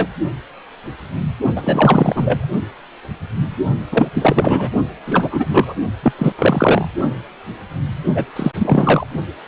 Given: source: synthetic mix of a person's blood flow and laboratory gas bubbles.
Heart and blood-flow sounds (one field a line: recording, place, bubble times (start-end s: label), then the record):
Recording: Doppler ultrasound of blood flow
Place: precordium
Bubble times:
0.00-0.09 s: bubbles
1.56-2.46 s: bubbles
3.92-4.10 s: bubbles
4.14-4.71 s: bubbles
5.06-5.74 s: bubbles
6.03-6.12 s: bubbles
6.18-6.32 s: bubbles
6.38-6.85 s: bubbles
8.14-8.24 s: bubbles
8.35-8.51 s: bubbles
8.58-9.06 s: bubbles
From the record:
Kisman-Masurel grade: 333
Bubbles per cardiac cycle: rolling drumbeat, 9 or more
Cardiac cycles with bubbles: 50 to 99%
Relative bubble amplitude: loud (0.450 to 0.775)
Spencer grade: 3 (all of the cardiac periods contain showers or single bubble signals, but not dominating or overriding the cardiac motion signals)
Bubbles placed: only in the low amplitude regions of the cardiac cycle